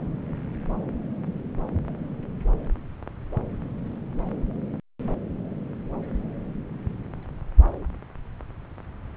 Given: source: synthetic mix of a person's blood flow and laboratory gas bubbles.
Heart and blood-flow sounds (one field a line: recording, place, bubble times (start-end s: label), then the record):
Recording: Doppler ultrasound of blood flow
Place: subclavian vein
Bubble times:
no bubbles
From the record:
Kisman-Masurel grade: 000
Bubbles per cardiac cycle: 0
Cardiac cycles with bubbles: 0%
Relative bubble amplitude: no bubbles discernible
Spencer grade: 0 (complete lack of bubble signals)